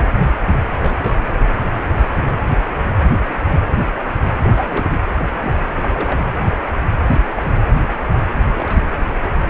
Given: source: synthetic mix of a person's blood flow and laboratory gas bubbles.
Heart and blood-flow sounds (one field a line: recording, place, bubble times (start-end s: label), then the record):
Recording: Doppler ultrasound of blood flow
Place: precordium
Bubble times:
0.82-1.29 s: bubbles
4.42-4.97 s: bubbles
5.16-5.25 s: bubbles
5.39-5.72 s: bubbles
5.81-6.22 s: bubbles
7.08-7.21 s: bubbles
7.36-7.54 s: bubbles
8.44-8.88 s: bubbles
From the record:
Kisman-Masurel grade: 221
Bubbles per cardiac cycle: several, 3 to 8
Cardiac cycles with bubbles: 10 to 50%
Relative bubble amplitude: barely perceptible (0.100 to 0.250)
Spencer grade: 2 (many but less than half of the cardiac periods contain bubble signals, singularly or in groups)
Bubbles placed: anywhere in the cardiac cycle